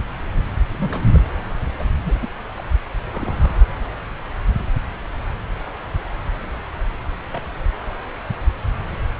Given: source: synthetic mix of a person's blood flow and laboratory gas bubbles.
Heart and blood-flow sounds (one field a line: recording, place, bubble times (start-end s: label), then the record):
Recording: Doppler ultrasound of blood flow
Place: subclavian vein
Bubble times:
0.68-1.19 s: bubbles
1.79-1.83 s: bubbles
1.98-2.15 s: bubbles
2.21-2.27 s: bubbles
2.58-2.63 s: bubbles
3.12-3.56 s: bubbles
7.32-7.41 s: bubbles
From the record:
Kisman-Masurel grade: 121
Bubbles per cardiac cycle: 1 to 2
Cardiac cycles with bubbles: 10 to 50%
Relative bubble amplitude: barely perceptible (0.100 to 0.250)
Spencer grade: 2 (many but less than half of the cardiac periods contain bubble signals, singularly or in groups)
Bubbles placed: anywhere in the cardiac cycle